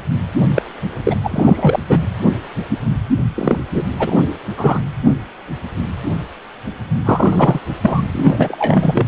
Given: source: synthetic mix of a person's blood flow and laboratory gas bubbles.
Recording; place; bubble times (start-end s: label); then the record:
Doppler ultrasound of blood flow; precordium
0.55-0.62 s: bubbles
1.05-1.16 s: bubbles
1.23-1.83 s: bubbles
1.89-1.99 s: bubbles
3.35-3.59 s: bubbles
3.74-3.83 s: bubbles
3.99-4.16 s: bubbles
4.57-4.80 s: bubbles
7.04-7.59 s: bubbles
7.82-8.02 s: bubbles
8.12-9.05 s: bubbles
From the record:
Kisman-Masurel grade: 233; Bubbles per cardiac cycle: several, 3 to 8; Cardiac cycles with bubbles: 50 to 99%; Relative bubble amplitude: loud (0.450 to 0.775); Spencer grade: 3 (all of the cardiac periods contain showers or single bubble signals, but not dominating or overriding the cardiac motion signals); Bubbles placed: anywhere in the cardiac cycle